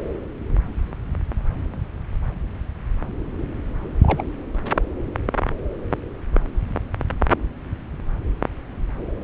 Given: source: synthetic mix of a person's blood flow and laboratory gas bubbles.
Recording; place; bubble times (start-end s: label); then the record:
Doppler ultrasound of blood flow; subclavian vein
4.03-4.24 s: bubbles
4.71-4.76 s: bubbles
From the record:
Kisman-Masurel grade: 111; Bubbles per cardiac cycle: 1 to 2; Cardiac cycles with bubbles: 1 to 10%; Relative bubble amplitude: barely perceptible (0.100 to 0.250); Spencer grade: 1 (occasional bubble signal discernible with the cardiac motion signal, with majority of cardiac periods free of bubbles); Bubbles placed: anywhere in the cardiac cycle